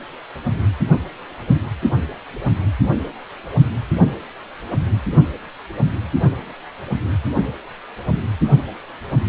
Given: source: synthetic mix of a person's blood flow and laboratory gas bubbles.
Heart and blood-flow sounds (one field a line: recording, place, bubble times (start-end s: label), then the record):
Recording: Doppler ultrasound of blood flow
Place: precordium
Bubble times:
no bubbles
From the record:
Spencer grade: 0 (complete lack of bubble signals)